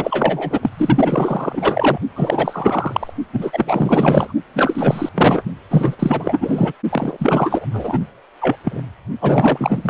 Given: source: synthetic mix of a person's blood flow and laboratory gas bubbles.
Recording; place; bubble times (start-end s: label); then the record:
Doppler ultrasound of blood flow; precordium
0.00-0.70 s: bubbles
0.74-1.98 s: bubbles
2.15-3.13 s: bubbles
3.33-4.33 s: bubbles
4.54-5.09 s: bubbles
5.14-5.42 s: bubbles
5.70-5.96 s: bubbles
5.99-6.74 s: bubbles
6.92-7.66 s: bubbles
7.73-7.99 s: bubbles
8.41-8.56 s: bubbles
8.64-8.83 s: bubbles
9.21-9.90 s: bubbles
From the record:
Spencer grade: 4 (maximum detectable bubble signal sounding continuously throughout systole and diastole of every cardiac period, and overriding the amplitude of the normal cardiac signals); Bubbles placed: only in the low amplitude regions of the cardiac cycle